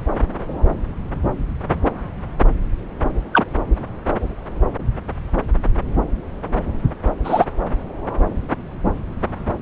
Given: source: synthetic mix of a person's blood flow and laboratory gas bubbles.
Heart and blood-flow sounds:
Doppler ultrasound of blood flow; subclavian vein
3.33-3.44 s: bubbles
7.24-7.45 s: bubbles
From the record:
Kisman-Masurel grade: 123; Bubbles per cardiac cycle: 1 to 2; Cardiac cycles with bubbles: 10 to 50%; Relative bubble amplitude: loud (0.450 to 0.775); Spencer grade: 2 (many but less than half of the cardiac periods contain bubble signals, singularly or in groups); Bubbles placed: anywhere in the cardiac cycle

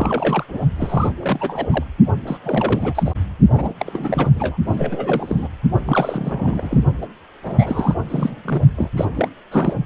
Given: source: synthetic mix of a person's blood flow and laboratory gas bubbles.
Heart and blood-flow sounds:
Doppler ultrasound of blood flow; precordium
0.00-0.44 s: bubbles
0.48-0.61 s: bubbles
0.76-1.11 s: bubbles
1.20-1.68 s: bubbles
1.70-1.84 s: bubbles
2.27-2.37 s: bubbles
2.44-3.12 s: bubbles
3.51-3.73 s: bubbles
3.79-4.30 s: bubbles
4.35-4.57 s: bubbles
4.66-5.47 s: bubbles
5.85-6.80 s: bubbles
7.01-7.06 s: bubbles
7.43-7.94 s: bubbles
8.09-8.42 s: bubbles
8.45-8.62 s: bubbles
8.76-8.91 s: bubbles
8.96-9.05 s: bubbles
9.15-9.29 s: bubbles
9.52-9.74 s: bubbles
From the record:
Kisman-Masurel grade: 342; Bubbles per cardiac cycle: rolling drumbeat, 9 or more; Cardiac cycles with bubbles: 100%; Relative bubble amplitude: moderate (0.250 to 0.450); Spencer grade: 3 (all of the cardiac periods contain showers or single bubble signals, but not dominating or overriding the cardiac motion signals); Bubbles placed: only in the low amplitude regions of the cardiac cycle

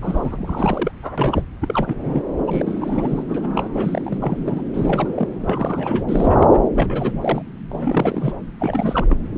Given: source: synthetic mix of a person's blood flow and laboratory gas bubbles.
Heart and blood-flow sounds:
Doppler ultrasound of blood flow; subclavian vein
0.01-0.91 s: bubbles
1.02-1.12 s: bubbles
1.18-1.44 s: bubbles
1.61-2.23 s: bubbles
2.47-3.23 s: bubbles
3.28-4.64 s: bubbles
4.73-5.27 s: bubbles
5.40-6.46 s: bubbles
6.51-6.68 s: bubbles
6.75-7.14 s: bubbles
7.21-7.42 s: bubbles
7.69-8.36 s: bubbles
8.59-9.17 s: bubbles
From the record:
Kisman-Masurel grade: 342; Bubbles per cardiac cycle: rolling drumbeat, 9 or more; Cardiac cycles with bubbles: 100%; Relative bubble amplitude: moderate (0.250 to 0.450); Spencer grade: 3 (all of the cardiac periods contain showers or single bubble signals, but not dominating or overriding the cardiac motion signals); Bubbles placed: anywhere in the cardiac cycle

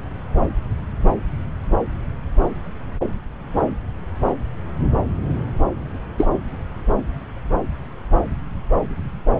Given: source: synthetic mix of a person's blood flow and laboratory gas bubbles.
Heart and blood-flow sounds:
Doppler ultrasound of blood flow; subclavian vein
6.17-6.26 s: bubbles
From the record:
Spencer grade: 1 (occasional bubble signal discernible with the cardiac motion signal, with majority of cardiac periods free of bubbles); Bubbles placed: anywhere in the cardiac cycle

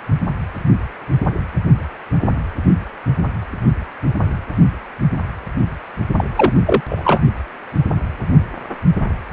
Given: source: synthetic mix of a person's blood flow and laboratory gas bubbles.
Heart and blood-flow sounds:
Doppler ultrasound of blood flow; precordium
6.17-6.25 s: bubbles
6.37-6.53 s: bubbles
6.66-6.81 s: bubbles
6.89-7.21 s: bubbles
From the record:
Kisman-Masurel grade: 223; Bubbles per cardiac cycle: several, 3 to 8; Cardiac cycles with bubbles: 10 to 50%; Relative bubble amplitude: loud (0.450 to 0.775); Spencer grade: 2 (many but less than half of the cardiac periods contain bubble signals, singularly or in groups); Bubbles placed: only in the low amplitude regions of the cardiac cycle

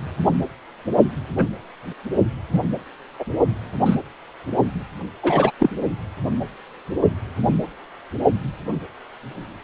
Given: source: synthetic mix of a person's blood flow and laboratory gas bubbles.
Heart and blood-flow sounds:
Doppler ultrasound of blood flow; precordium
1.38-1.48 s: bubbles
2.52-2.60 s: bubbles
3.19-3.25 s: bubbles
3.85-3.98 s: bubbles
5.23-5.51 s: bubbles
5.59-5.70 s: bubbles
From the record:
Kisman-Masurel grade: 123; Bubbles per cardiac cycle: 1 to 2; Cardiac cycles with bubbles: 10 to 50%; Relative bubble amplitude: loud (0.450 to 0.775); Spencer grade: 2 (many but less than half of the cardiac periods contain bubble signals, singularly or in groups); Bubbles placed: only in the low amplitude regions of the cardiac cycle

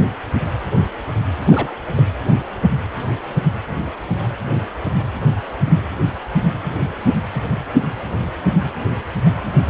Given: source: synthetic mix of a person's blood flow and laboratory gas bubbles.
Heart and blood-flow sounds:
Doppler ultrasound of blood flow; precordium
1.46-1.73 s: bubbles
1.95-2.11 s: bubbles
From the record:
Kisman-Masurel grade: 211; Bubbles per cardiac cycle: several, 3 to 8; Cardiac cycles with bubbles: 1 to 10%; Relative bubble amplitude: barely perceptible (0.100 to 0.250); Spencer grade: 1 (occasional bubble signal discernible with the cardiac motion signal, with majority of cardiac periods free of bubbles); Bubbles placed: anywhere in the cardiac cycle

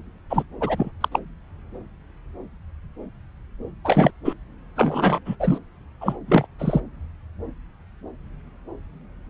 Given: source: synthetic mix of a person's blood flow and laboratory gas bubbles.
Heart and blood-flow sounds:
Doppler ultrasound of blood flow; subclavian vein
0.30-0.43 s: bubbles
0.60-0.91 s: bubbles
1.00-1.08 s: bubbles
1.11-1.20 s: bubbles
3.85-4.11 s: bubbles
4.25-4.33 s: bubbles
4.76-5.20 s: bubbles
5.25-5.36 s: bubbles
5.40-5.58 s: bubbles
6.01-6.18 s: bubbles
6.28-6.46 s: bubbles
6.59-6.81 s: bubbles
From the record:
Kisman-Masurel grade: 222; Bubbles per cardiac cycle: several, 3 to 8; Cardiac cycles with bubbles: 10 to 50%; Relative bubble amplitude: moderate (0.250 to 0.450); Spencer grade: 2 (many but less than half of the cardiac periods contain bubble signals, singularly or in groups); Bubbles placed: anywhere in the cardiac cycle

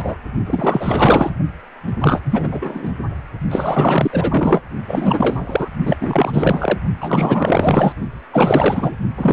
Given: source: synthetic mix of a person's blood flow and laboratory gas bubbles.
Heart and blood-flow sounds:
Doppler ultrasound of blood flow; precordium
0.00-0.16 s: bubbles
0.47-1.32 s: bubbles
1.87-1.93 s: bubbles
1.99-2.21 s: bubbles
2.24-2.92 s: bubbles
3.50-4.62 s: bubbles
4.88-5.69 s: bubbles
5.85-5.97 s: bubbles
6.00-6.79 s: bubbles
7.00-7.93 s: bubbles
8.33-8.96 s: bubbles
9.17-9.33 s: bubbles
From the record:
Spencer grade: 4 (maximum detectable bubble signal sounding continuously throughout systole and diastole of every cardiac period, and overriding the amplitude of the normal cardiac signals); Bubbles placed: only in the low amplitude regions of the cardiac cycle

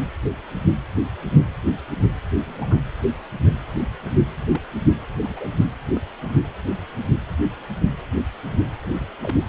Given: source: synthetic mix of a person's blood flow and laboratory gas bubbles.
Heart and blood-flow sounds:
Doppler ultrasound of blood flow; precordium
2.45-2.79 s: bubbles
4.51-4.60 s: bubbles
5.23-5.48 s: bubbles
5.85-6.01 s: bubbles
6.22-6.35 s: bubbles
8.82-9.08 s: bubbles
9.21-9.37 s: bubbles
From the record:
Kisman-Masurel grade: 121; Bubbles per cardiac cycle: 1 to 2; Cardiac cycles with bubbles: 10 to 50%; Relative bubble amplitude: barely perceptible (0.100 to 0.250); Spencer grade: 2 (many but less than half of the cardiac periods contain bubble signals, singularly or in groups); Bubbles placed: anywhere in the cardiac cycle

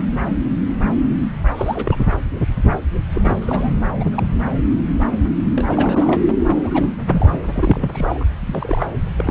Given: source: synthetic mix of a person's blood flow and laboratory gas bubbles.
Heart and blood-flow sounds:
Doppler ultrasound of blood flow; subclavian vein
1.55-2.00 s: bubbles
3.12-3.38 s: bubbles
3.41-3.74 s: bubbles
3.99-4.23 s: bubbles
5.56-6.21 s: bubbles
6.64-6.88 s: bubbles
7.12-7.44 s: bubbles
7.53-8.24 s: bubbles
8.46-8.87 s: bubbles
9.17-9.31 s: bubbles
From the record:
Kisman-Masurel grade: 232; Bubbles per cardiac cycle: several, 3 to 8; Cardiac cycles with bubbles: 50 to 99%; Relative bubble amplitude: moderate (0.250 to 0.450); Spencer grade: 3 (all of the cardiac periods contain showers or single bubble signals, but not dominating or overriding the cardiac motion signals); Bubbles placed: anywhere in the cardiac cycle

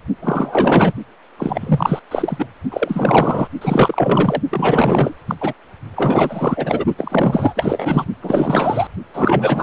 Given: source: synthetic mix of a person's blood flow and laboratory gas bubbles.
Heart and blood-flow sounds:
Doppler ultrasound of blood flow; precordium
0.22-0.93 s: bubbles
1.38-1.99 s: bubbles
2.11-2.46 s: bubbles
2.71-3.48 s: bubbles
3.61-4.42 s: bubbles
4.50-5.15 s: bubbles
5.27-5.35 s: bubbles
5.41-5.53 s: bubbles
5.96-6.85 s: bubbles
6.98-7.54 s: bubbles
7.56-8.04 s: bubbles
8.21-8.87 s: bubbles
9.13-9.63 s: bubbles
From the record:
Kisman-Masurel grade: 444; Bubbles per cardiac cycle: continuous sound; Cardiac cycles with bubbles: 100%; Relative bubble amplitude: maximal (0.775 to 0.999); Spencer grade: 4 (maximum detectable bubble signal sounding continuously throughout systole and diastole of every cardiac period, and overriding the amplitude of the normal cardiac signals); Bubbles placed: only in the low amplitude regions of the cardiac cycle

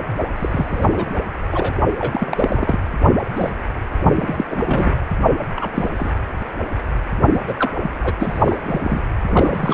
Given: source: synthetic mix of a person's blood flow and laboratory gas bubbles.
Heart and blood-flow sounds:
Doppler ultrasound of blood flow; precordium
0.36-0.86 s: bubbles
0.92-1.19 s: bubbles
1.51-1.73 s: bubbles
1.98-2.80 s: bubbles
3.22-3.51 s: bubbles
4.03-4.11 s: bubbles
4.16-4.45 s: bubbles
4.51-4.96 s: bubbles
5.56-5.70 s: bubbles
5.74-5.90 s: bubbles
5.97-6.11 s: bubbles
7.33-7.41 s: bubbles
7.47-7.54 s: bubbles
7.58-7.71 s: bubbles
7.82-7.91 s: bubbles
8.04-8.13 s: bubbles
8.19-8.56 s: bubbles
8.63-9.01 s: bubbles
9.29-9.74 s: bubbles
From the record:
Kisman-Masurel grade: 242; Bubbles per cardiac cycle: several, 3 to 8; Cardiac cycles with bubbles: 100%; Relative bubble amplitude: moderate (0.250 to 0.450); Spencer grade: 3 (all of the cardiac periods contain showers or single bubble signals, but not dominating or overriding the cardiac motion signals); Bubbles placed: anywhere in the cardiac cycle

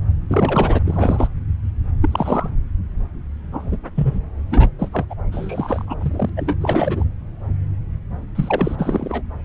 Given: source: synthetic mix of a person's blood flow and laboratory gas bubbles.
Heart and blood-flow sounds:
Doppler ultrasound of blood flow; subclavian vein
0.29-0.79 s: bubbles
0.84-1.28 s: bubbles
2.01-2.49 s: bubbles
3.52-3.79 s: bubbles
3.95-4.20 s: bubbles
4.50-4.68 s: bubbles
4.79-4.88 s: bubbles
4.92-5.05 s: bubbles
5.09-5.14 s: bubbles
5.31-5.96 s: bubbles
6.01-6.29 s: bubbles
6.37-6.55 s: bubbles
6.61-7.04 s: bubbles
8.35-9.22 s: bubbles
From the record:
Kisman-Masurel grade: 232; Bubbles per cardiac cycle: several, 3 to 8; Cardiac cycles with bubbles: 50 to 99%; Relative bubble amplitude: moderate (0.250 to 0.450); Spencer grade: 3 (all of the cardiac periods contain showers or single bubble signals, but not dominating or overriding the cardiac motion signals); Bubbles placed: anywhere in the cardiac cycle

